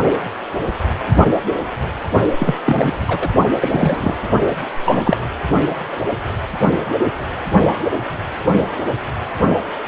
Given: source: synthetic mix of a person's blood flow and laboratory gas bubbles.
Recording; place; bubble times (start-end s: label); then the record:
Doppler ultrasound of blood flow; precordium
2.39-2.58 s: bubbles
2.65-2.95 s: bubbles
3.07-3.30 s: bubbles
3.61-4.15 s: bubbles
4.85-5.17 s: bubbles
From the record:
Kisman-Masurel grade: 223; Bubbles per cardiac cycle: several, 3 to 8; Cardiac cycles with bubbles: 10 to 50%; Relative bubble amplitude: loud (0.450 to 0.775); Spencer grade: 2 (many but less than half of the cardiac periods contain bubble signals, singularly or in groups); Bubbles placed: only in the low amplitude regions of the cardiac cycle